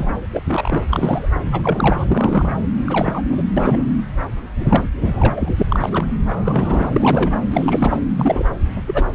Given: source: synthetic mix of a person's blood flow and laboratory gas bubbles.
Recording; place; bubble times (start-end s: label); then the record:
Doppler ultrasound of blood flow; subclavian vein
0.00-0.20 s: bubbles
0.33-0.40 s: bubbles
0.47-0.84 s: bubbles
0.88-1.29 s: bubbles
1.34-1.40 s: bubbles
1.52-2.05 s: bubbles
2.09-2.54 s: bubbles
2.86-3.21 s: bubbles
3.29-3.42 s: bubbles
3.56-3.83 s: bubbles
4.58-4.88 s: bubbles
5.01-5.54 s: bubbles
5.58-5.63 s: bubbles
5.68-6.05 s: bubbles
6.26-6.91 s: bubbles
6.94-7.40 s: bubbles
7.50-8.00 s: bubbles
8.10-8.46 s: bubbles
8.75-8.82 s: bubbles
8.86-9.05 s: bubbles
From the record:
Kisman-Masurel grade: 242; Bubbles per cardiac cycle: several, 3 to 8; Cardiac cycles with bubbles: 100%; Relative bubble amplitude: moderate (0.250 to 0.450); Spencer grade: 3 (all of the cardiac periods contain showers or single bubble signals, but not dominating or overriding the cardiac motion signals); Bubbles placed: anywhere in the cardiac cycle